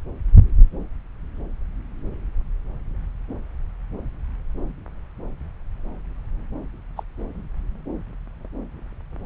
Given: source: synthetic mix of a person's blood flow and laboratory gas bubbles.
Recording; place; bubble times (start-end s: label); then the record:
Doppler ultrasound of blood flow; subclavian vein
6.96-7.03 s: bubbles
From the record:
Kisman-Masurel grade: 121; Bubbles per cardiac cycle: 1 to 2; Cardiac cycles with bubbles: 10 to 50%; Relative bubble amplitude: barely perceptible (0.100 to 0.250); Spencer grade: 2 (many but less than half of the cardiac periods contain bubble signals, singularly or in groups); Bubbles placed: anywhere in the cardiac cycle